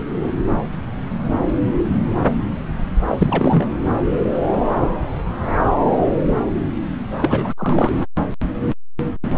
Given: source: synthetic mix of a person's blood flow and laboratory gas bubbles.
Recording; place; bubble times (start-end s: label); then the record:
Doppler ultrasound of blood flow; subclavian vein
3.07-3.73 s: bubbles
7.22-7.53 s: bubbles
7.58-7.92 s: bubbles
From the record:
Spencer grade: 2 (many but less than half of the cardiac periods contain bubble signals, singularly or in groups); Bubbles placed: anywhere in the cardiac cycle